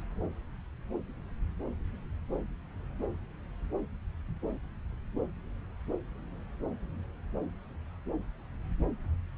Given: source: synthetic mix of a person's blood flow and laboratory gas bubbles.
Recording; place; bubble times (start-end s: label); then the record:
Doppler ultrasound of blood flow; subclavian vein
no bubbles
From the record:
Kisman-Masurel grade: 000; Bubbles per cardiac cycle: 0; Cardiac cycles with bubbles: 0%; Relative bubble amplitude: no bubbles discernible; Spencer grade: 0 (complete lack of bubble signals)